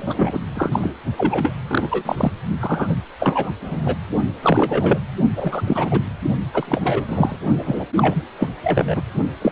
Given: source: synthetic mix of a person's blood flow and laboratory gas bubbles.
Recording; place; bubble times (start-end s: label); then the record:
Doppler ultrasound of blood flow; precordium
0.00-0.41 s: bubbles
0.55-0.94 s: bubbles
1.17-1.54 s: bubbles
1.68-2.32 s: bubbles
2.61-2.97 s: bubbles
3.19-3.51 s: bubbles
3.61-3.97 s: bubbles
4.42-4.99 s: bubbles
5.36-6.02 s: bubbles
6.54-7.36 s: bubbles
7.57-7.87 s: bubbles
7.95-8.14 s: bubbles
8.39-8.49 s: bubbles
8.63-9.02 s: bubbles
9.41-9.51 s: bubbles
From the record:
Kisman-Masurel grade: 333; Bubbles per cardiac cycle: rolling drumbeat, 9 or more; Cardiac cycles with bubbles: 50 to 99%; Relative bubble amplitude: loud (0.450 to 0.775); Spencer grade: 3 (all of the cardiac periods contain showers or single bubble signals, but not dominating or overriding the cardiac motion signals); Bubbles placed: only in the low amplitude regions of the cardiac cycle